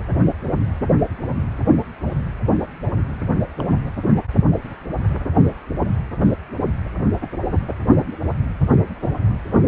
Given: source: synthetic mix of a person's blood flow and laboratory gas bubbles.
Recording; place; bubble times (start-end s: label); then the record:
Doppler ultrasound of blood flow; precordium
3.58-3.64 s: bubbles
From the record:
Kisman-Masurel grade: 111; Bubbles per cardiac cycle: 1 to 2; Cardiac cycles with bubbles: 1 to 10%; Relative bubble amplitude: barely perceptible (0.100 to 0.250); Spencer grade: 1 (occasional bubble signal discernible with the cardiac motion signal, with majority of cardiac periods free of bubbles); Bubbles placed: anywhere in the cardiac cycle